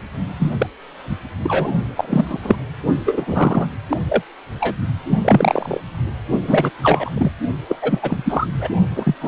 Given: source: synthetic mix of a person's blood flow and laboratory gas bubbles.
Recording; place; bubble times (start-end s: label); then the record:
Doppler ultrasound of blood flow; precordium
0.40-0.54 s: bubbles
0.58-0.67 s: bubbles
1.43-1.72 s: bubbles
1.96-2.40 s: bubbles
2.42-2.56 s: bubbles
3.05-3.66 s: bubbles
3.90-3.97 s: bubbles
4.09-4.22 s: bubbles
4.60-4.77 s: bubbles
5.09-5.19 s: bubbles
5.21-5.80 s: bubbles
6.47-6.71 s: bubbles
6.82-7.11 s: bubbles
7.14-7.31 s: bubbles
7.68-7.75 s: bubbles
7.81-8.46 s: bubbles
8.59-8.68 s: bubbles
8.95-9.15 s: bubbles
9.21-9.28 s: bubbles
From the record:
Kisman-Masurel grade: 243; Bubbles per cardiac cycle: several, 3 to 8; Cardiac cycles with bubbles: 100%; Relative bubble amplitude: loud (0.450 to 0.775); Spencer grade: 3 (all of the cardiac periods contain showers or single bubble signals, but not dominating or overriding the cardiac motion signals); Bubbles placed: only in the low amplitude regions of the cardiac cycle